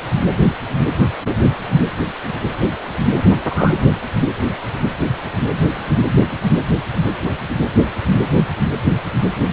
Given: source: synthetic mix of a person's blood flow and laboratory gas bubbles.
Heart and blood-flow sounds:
Doppler ultrasound of blood flow; precordium
3.24-3.31 s: bubbles
3.49-3.72 s: bubbles
From the record:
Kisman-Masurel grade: 113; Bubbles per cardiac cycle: 1 to 2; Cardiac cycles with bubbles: 1 to 10%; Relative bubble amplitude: loud (0.450 to 0.775); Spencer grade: 1 (occasional bubble signal discernible with the cardiac motion signal, with majority of cardiac periods free of bubbles); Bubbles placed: anywhere in the cardiac cycle

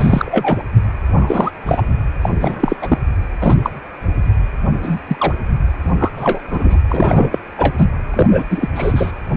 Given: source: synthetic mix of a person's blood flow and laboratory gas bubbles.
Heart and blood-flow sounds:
Doppler ultrasound of blood flow; precordium
0.00-0.62 s: bubbles
1.16-1.51 s: bubbles
1.66-1.83 s: bubbles
2.21-2.76 s: bubbles
2.81-2.98 s: bubbles
3.40-3.56 s: bubbles
3.63-3.70 s: bubbles
4.83-5.00 s: bubbles
5.08-5.34 s: bubbles
5.99-6.09 s: bubbles
6.17-6.42 s: bubbles
6.50-6.79 s: bubbles
6.88-7.38 s: bubbles
7.58-7.86 s: bubbles
8.13-8.28 s: bubbles
8.31-8.45 s: bubbles
8.50-8.69 s: bubbles
8.74-9.12 s: bubbles
From the record:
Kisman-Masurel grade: 233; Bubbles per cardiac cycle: several, 3 to 8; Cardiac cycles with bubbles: 50 to 99%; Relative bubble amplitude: loud (0.450 to 0.775); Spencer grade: 3 (all of the cardiac periods contain showers or single bubble signals, but not dominating or overriding the cardiac motion signals); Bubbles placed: anywhere in the cardiac cycle

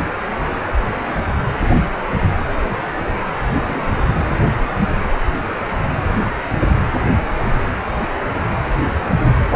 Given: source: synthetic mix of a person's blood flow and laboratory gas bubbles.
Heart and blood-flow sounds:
Doppler ultrasound of blood flow; precordium
3.46-4.01 s: bubbles
From the record:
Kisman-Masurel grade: 211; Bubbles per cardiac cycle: several, 3 to 8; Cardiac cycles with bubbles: 1 to 10%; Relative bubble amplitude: barely perceptible (0.100 to 0.250); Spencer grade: 1 (occasional bubble signal discernible with the cardiac motion signal, with majority of cardiac periods free of bubbles); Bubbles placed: anywhere in the cardiac cycle

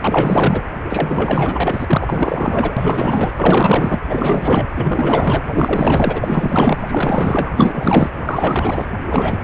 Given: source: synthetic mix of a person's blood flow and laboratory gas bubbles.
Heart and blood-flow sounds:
Doppler ultrasound of blood flow; precordium
0.01-0.62 s: bubbles
0.90-2.74 s: bubbles
2.77-3.32 s: bubbles
3.36-3.99 s: bubbles
4.09-4.69 s: bubbles
4.77-5.43 s: bubbles
5.50-6.77 s: bubbles
6.87-7.50 s: bubbles
7.56-8.09 s: bubbles
8.25-8.86 s: bubbles
9.07-9.43 s: bubbles
From the record:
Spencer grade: 4 (maximum detectable bubble signal sounding continuously throughout systole and diastole of every cardiac period, and overriding the amplitude of the normal cardiac signals); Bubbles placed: anywhere in the cardiac cycle

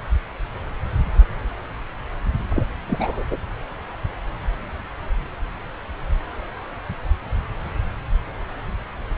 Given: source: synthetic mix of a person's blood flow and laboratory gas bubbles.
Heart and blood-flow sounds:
Doppler ultrasound of blood flow; subclavian vein
2.50-2.66 s: bubbles
2.87-3.23 s: bubbles
3.31-3.37 s: bubbles
From the record:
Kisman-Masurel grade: 212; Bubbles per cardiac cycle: several, 3 to 8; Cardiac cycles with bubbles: 1 to 10%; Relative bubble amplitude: moderate (0.250 to 0.450); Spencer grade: 1 (occasional bubble signal discernible with the cardiac motion signal, with majority of cardiac periods free of bubbles); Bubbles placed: anywhere in the cardiac cycle

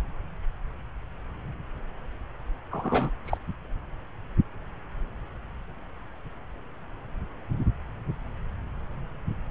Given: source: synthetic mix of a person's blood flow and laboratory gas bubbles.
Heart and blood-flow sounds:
Doppler ultrasound of blood flow; subclavian vein
2.71-3.11 s: bubbles
3.25-3.38 s: bubbles
From the record:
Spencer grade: 1 (occasional bubble signal discernible with the cardiac motion signal, with majority of cardiac periods free of bubbles); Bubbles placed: anywhere in the cardiac cycle

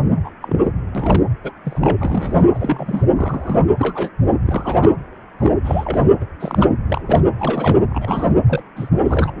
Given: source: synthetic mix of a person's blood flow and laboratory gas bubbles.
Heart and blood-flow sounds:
Doppler ultrasound of blood flow; precordium
0.24-0.30 s: bubbles
0.42-0.58 s: bubbles
0.62-0.72 s: bubbles
0.94-1.23 s: bubbles
1.44-1.52 s: bubbles
1.65-1.96 s: bubbles
1.98-2.44 s: bubbles
2.54-3.03 s: bubbles
3.17-3.64 s: bubbles
3.77-4.10 s: bubbles
4.45-4.96 s: bubbles
5.39-5.59 s: bubbles
5.64-6.03 s: bubbles
6.21-6.25 s: bubbles
6.40-6.68 s: bubbles
6.88-7.01 s: bubbles
7.06-7.21 s: bubbles
7.38-7.76 s: bubbles
7.89-8.34 s: bubbles
8.46-8.63 s: bubbles
8.76-8.89 s: bubbles
9.04-9.32 s: bubbles
From the record:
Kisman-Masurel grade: 242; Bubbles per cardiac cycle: several, 3 to 8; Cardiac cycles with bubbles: 100%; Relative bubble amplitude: moderate (0.250 to 0.450); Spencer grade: 3 (all of the cardiac periods contain showers or single bubble signals, but not dominating or overriding the cardiac motion signals); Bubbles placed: anywhere in the cardiac cycle

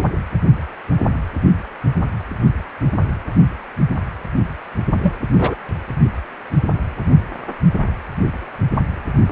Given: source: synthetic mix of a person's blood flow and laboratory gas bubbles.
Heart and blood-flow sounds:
Doppler ultrasound of blood flow; precordium
5.03-5.15 s: bubbles
5.38-5.55 s: bubbles
From the record:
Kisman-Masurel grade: 113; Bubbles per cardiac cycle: 1 to 2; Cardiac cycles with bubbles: 1 to 10%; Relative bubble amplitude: loud (0.450 to 0.775); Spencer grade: 1 (occasional bubble signal discernible with the cardiac motion signal, with majority of cardiac periods free of bubbles); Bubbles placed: only in the low amplitude regions of the cardiac cycle

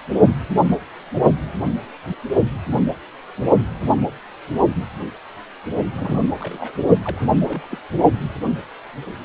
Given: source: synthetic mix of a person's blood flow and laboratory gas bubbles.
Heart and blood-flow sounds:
Doppler ultrasound of blood flow; precordium
5.92-6.28 s: bubbles
6.39-6.72 s: bubbles
7.04-7.29 s: bubbles
7.33-7.42 s: bubbles
7.45-7.68 s: bubbles
7.71-7.78 s: bubbles
From the record:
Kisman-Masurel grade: 221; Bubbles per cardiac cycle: several, 3 to 8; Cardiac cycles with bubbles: 10 to 50%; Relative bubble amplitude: barely perceptible (0.100 to 0.250); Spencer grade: 2 (many but less than half of the cardiac periods contain bubble signals, singularly or in groups); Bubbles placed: only in the low amplitude regions of the cardiac cycle

